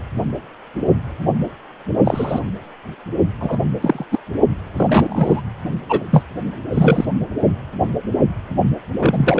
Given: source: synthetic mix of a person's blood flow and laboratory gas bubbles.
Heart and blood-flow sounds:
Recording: Doppler ultrasound of blood flow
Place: precordium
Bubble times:
2.03-2.40 s: bubbles
3.40-3.57 s: bubbles
3.80-4.04 s: bubbles
4.11-4.19 s: bubbles
4.77-5.41 s: bubbles
5.88-6.02 s: bubbles
6.10-6.24 s: bubbles
6.72-7.05 s: bubbles
8.98-9.40 s: bubbles
From the record:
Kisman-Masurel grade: 223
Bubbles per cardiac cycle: several, 3 to 8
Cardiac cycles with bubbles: 10 to 50%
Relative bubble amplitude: loud (0.450 to 0.775)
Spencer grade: 2 (many but less than half of the cardiac periods contain bubble signals, singularly or in groups)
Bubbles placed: only in the low amplitude regions of the cardiac cycle

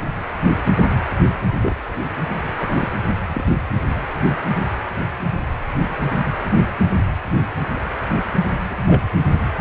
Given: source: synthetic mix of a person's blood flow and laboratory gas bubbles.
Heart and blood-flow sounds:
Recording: Doppler ultrasound of blood flow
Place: precordium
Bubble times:
1.62-1.75 s: bubbles
2.60-2.89 s: bubbles
3.08-3.14 s: bubbles
3.27-3.43 s: bubbles
8.66-8.76 s: bubbles
8.87-9.02 s: bubbles
From the record:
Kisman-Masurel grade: 122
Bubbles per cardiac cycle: 1 to 2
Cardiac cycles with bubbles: 10 to 50%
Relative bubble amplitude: moderate (0.250 to 0.450)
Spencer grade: 2 (many but less than half of the cardiac periods contain bubble signals, singularly or in groups)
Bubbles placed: anywhere in the cardiac cycle

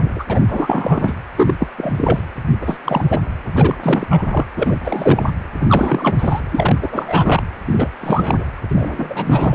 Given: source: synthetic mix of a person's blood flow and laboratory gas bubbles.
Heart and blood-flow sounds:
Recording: Doppler ultrasound of blood flow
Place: precordium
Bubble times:
0.00-0.10 s: bubbles
0.15-0.24 s: bubbles
0.30-0.44 s: bubbles
0.47-1.15 s: bubbles
1.37-1.54 s: bubbles
1.60-1.67 s: bubbles
1.77-2.23 s: bubbles
2.61-2.79 s: bubbles
2.83-3.19 s: bubbles
3.53-3.77 s: bubbles
3.82-4.07 s: bubbles
4.09-4.26 s: bubbles
4.30-4.46 s: bubbles
4.55-4.76 s: bubbles
4.83-5.31 s: bubbles
5.59-6.40 s: bubbles
6.51-6.78 s: bubbles
6.82-7.43 s: bubbles
7.67-7.88 s: bubbles
8.00-8.44 s: bubbles
8.69-9.55 s: bubbles
From the record:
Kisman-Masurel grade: 343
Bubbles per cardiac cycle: rolling drumbeat, 9 or more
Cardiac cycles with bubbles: 100%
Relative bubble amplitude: loud (0.450 to 0.775)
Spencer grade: 3 (all of the cardiac periods contain showers or single bubble signals, but not dominating or overriding the cardiac motion signals)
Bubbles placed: anywhere in the cardiac cycle

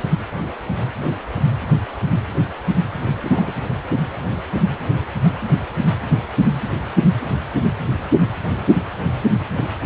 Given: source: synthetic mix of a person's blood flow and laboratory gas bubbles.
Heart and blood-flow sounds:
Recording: Doppler ultrasound of blood flow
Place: precordium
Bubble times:
3.22-3.53 s: bubbles
From the record:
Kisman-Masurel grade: 112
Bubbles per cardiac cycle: 1 to 2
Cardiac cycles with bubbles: 1 to 10%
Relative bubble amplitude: moderate (0.250 to 0.450)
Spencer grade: 1 (occasional bubble signal discernible with the cardiac motion signal, with majority of cardiac periods free of bubbles)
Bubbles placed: anywhere in the cardiac cycle

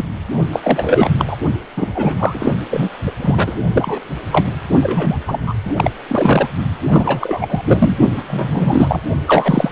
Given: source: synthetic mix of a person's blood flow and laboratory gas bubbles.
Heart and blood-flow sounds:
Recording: Doppler ultrasound of blood flow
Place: precordium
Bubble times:
0.00-0.05 s: bubbles
0.52-0.59 s: bubbles
0.64-1.10 s: bubbles
1.19-1.37 s: bubbles
1.77-2.54 s: bubbles
2.71-2.89 s: bubbles
3.06-3.11 s: bubbles
3.17-3.60 s: bubbles
3.70-4.01 s: bubbles
4.32-4.47 s: bubbles
4.82-5.17 s: bubbles
5.27-5.53 s: bubbles
5.66-5.74 s: bubbles
5.77-5.91 s: bubbles
6.08-6.49 s: bubbles
6.91-7.46 s: bubbles
7.50-7.62 s: bubbles
7.64-7.98 s: bubbles
8.15-8.24 s: bubbles
8.28-9.01 s: bubbles
9.27-9.72 s: bubbles
From the record:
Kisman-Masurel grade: 343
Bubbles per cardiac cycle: rolling drumbeat, 9 or more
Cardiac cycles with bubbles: 100%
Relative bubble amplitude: loud (0.450 to 0.775)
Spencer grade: 3 (all of the cardiac periods contain showers or single bubble signals, but not dominating or overriding the cardiac motion signals)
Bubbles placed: only in the low amplitude regions of the cardiac cycle

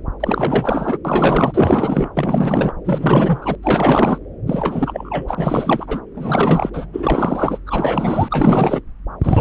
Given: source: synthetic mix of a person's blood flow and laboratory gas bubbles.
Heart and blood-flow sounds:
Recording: Doppler ultrasound of blood flow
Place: subclavian vein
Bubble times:
0.20-0.98 s: bubbles
1.04-2.10 s: bubbles
2.15-2.73 s: bubbles
2.84-3.56 s: bubbles
3.62-4.18 s: bubbles
4.46-6.00 s: bubbles
6.14-6.70 s: bubbles
6.73-6.86 s: bubbles
6.93-7.58 s: bubbles
7.66-8.29 s: bubbles
8.31-8.81 s: bubbles
9.23-9.41 s: bubbles
From the record:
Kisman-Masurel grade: 444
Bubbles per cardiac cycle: continuous sound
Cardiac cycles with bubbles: 100%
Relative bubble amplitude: maximal (0.775 to 0.999)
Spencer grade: 4 (maximum detectable bubble signal sounding continuously throughout systole and diastole of every cardiac period, and overriding the amplitude of the normal cardiac signals)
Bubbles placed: anywhere in the cardiac cycle

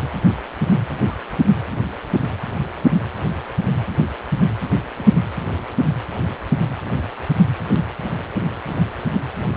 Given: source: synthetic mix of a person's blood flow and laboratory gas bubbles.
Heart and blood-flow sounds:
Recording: Doppler ultrasound of blood flow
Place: precordium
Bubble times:
1.06-1.15 s: bubbles
4.96-5.15 s: bubbles
From the record:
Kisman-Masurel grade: 121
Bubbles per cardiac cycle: 1 to 2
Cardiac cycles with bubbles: 10 to 50%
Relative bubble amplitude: barely perceptible (0.100 to 0.250)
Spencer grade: 2 (many but less than half of the cardiac periods contain bubble signals, singularly or in groups)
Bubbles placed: anywhere in the cardiac cycle

